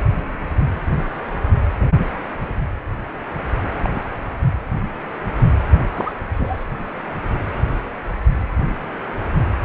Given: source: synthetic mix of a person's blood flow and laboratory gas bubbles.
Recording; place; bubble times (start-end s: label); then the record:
Doppler ultrasound of blood flow; precordium
3.83-3.90 s: bubbles
3.94-4.01 s: bubbles
5.93-6.12 s: bubbles
6.35-6.65 s: bubbles
From the record:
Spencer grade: 2 (many but less than half of the cardiac periods contain bubble signals, singularly or in groups); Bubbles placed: anywhere in the cardiac cycle